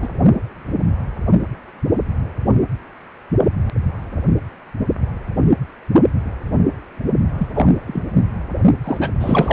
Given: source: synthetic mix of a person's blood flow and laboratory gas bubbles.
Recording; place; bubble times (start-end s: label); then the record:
Doppler ultrasound of blood flow; precordium
0.02-0.08 s: bubbles
7.38-7.47 s: bubbles
7.54-7.67 s: bubbles
7.86-8.02 s: bubbles
8.84-9.10 s: bubbles
9.20-9.53 s: bubbles
From the record:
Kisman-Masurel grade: 223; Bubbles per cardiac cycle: several, 3 to 8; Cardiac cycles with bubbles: 10 to 50%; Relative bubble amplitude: loud (0.450 to 0.775); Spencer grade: 2 (many but less than half of the cardiac periods contain bubble signals, singularly or in groups); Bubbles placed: only in the low amplitude regions of the cardiac cycle